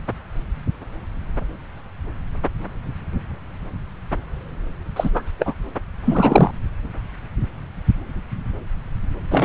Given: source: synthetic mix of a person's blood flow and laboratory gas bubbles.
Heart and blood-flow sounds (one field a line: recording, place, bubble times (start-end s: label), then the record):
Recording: Doppler ultrasound of blood flow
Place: subclavian vein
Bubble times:
4.96-5.11 s: bubbles
5.14-5.23 s: bubbles
5.39-5.54 s: bubbles
6.04-6.51 s: bubbles
9.30-9.44 s: bubbles
From the record:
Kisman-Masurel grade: 223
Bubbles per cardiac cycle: several, 3 to 8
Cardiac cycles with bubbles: 10 to 50%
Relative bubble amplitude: loud (0.450 to 0.775)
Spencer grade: 2 (many but less than half of the cardiac periods contain bubble signals, singularly or in groups)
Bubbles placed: anywhere in the cardiac cycle